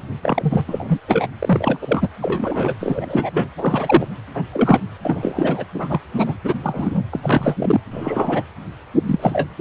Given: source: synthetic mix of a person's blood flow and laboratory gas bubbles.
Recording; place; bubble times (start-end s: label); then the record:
Doppler ultrasound of blood flow; precordium
0.23-0.64 s: bubbles
0.67-1.00 s: bubbles
1.08-1.27 s: bubbles
1.39-1.78 s: bubbles
1.81-2.08 s: bubbles
2.21-2.75 s: bubbles
2.79-3.31 s: bubbles
3.33-3.49 s: bubbles
3.58-4.08 s: bubbles
4.34-4.44 s: bubbles
4.53-4.81 s: bubbles
5.03-5.64 s: bubbles
5.74-6.00 s: bubbles
6.14-6.36 s: bubbles
6.43-6.59 s: bubbles
6.63-7.04 s: bubbles
7.11-7.20 s: bubbles
7.23-7.81 s: bubbles
7.90-8.43 s: bubbles
8.98-9.48 s: bubbles
From the record:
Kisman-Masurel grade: 243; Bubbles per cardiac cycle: several, 3 to 8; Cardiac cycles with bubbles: 100%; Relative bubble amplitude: loud (0.450 to 0.775); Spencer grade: 3 (all of the cardiac periods contain showers or single bubble signals, but not dominating or overriding the cardiac motion signals); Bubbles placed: anywhere in the cardiac cycle